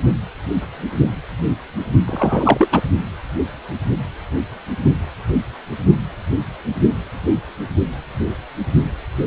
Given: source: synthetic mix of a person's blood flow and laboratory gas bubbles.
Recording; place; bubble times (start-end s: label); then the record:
Doppler ultrasound of blood flow; precordium
2.07-2.69 s: bubbles
2.72-2.81 s: bubbles
From the record:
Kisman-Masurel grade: 213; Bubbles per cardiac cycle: several, 3 to 8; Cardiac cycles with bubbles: 1 to 10%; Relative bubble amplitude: loud (0.450 to 0.775); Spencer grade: 1 (occasional bubble signal discernible with the cardiac motion signal, with majority of cardiac periods free of bubbles); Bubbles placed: only in the low amplitude regions of the cardiac cycle